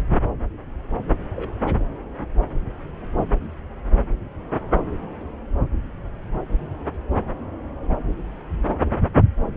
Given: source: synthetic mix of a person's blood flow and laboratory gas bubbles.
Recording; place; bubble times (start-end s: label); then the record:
Doppler ultrasound of blood flow; subclavian vein
1.35-1.57 s: bubbles
From the record:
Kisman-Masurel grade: 111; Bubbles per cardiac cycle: 1 to 2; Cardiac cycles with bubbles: 1 to 10%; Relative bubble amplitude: barely perceptible (0.100 to 0.250); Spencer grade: 1 (occasional bubble signal discernible with the cardiac motion signal, with majority of cardiac periods free of bubbles); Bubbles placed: anywhere in the cardiac cycle